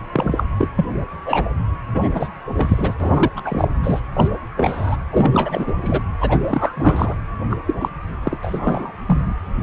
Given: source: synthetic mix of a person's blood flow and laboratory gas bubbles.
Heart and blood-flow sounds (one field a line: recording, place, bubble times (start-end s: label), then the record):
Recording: Doppler ultrasound of blood flow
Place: precordium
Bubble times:
0.12-0.43 s: bubbles
0.58-0.69 s: bubbles
0.76-0.85 s: bubbles
1.25-1.45 s: bubbles
1.94-2.08 s: bubbles
2.14-2.29 s: bubbles
2.55-2.95 s: bubbles
3.00-3.30 s: bubbles
3.36-3.41 s: bubbles
3.44-3.67 s: bubbles
3.83-4.01 s: bubbles
4.14-4.29 s: bubbles
4.57-4.96 s: bubbles
5.11-5.73 s: bubbles
5.82-6.02 s: bubbles
6.21-6.40 s: bubbles
6.45-7.15 s: bubbles
7.50-7.57 s: bubbles
7.67-7.75 s: bubbles
7.81-7.89 s: bubbles
8.23-8.38 s: bubbles
8.42-8.93 s: bubbles
9.07-9.36 s: bubbles
From the record:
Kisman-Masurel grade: 233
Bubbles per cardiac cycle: several, 3 to 8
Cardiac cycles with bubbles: 50 to 99%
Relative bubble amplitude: loud (0.450 to 0.775)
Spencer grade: 3 (all of the cardiac periods contain showers or single bubble signals, but not dominating or overriding the cardiac motion signals)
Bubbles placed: anywhere in the cardiac cycle